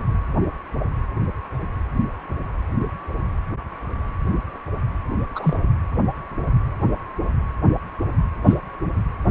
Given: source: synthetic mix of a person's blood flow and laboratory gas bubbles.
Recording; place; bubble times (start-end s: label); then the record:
Doppler ultrasound of blood flow; precordium
5.35-5.57 s: bubbles
8.45-8.54 s: bubbles
From the record:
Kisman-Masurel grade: 123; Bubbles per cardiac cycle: 1 to 2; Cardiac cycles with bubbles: 10 to 50%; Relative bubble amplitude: loud (0.450 to 0.775); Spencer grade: 2 (many but less than half of the cardiac periods contain bubble signals, singularly or in groups); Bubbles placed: anywhere in the cardiac cycle